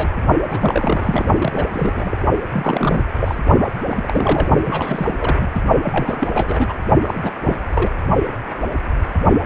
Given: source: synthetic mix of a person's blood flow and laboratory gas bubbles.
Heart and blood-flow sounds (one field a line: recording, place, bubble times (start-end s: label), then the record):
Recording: Doppler ultrasound of blood flow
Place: precordium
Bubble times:
0.00-0.12 s: bubbles
0.48-1.25 s: bubbles
1.40-1.66 s: bubbles
1.73-2.18 s: bubbles
2.52-3.02 s: bubbles
3.20-3.40 s: bubbles
3.60-3.70 s: bubbles
3.88-4.48 s: bubbles
4.63-5.50 s: bubbles
5.54-5.59 s: bubbles
5.84-6.28 s: bubbles
6.33-6.74 s: bubbles
7.01-7.20 s: bubbles
7.23-7.30 s: bubbles
7.41-7.57 s: bubbles
7.71-7.90 s: bubbles
From the record:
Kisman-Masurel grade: 332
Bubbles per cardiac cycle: rolling drumbeat, 9 or more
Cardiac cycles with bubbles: 50 to 99%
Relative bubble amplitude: moderate (0.250 to 0.450)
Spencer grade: 3 (all of the cardiac periods contain showers or single bubble signals, but not dominating or overriding the cardiac motion signals)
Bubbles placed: only in the low amplitude regions of the cardiac cycle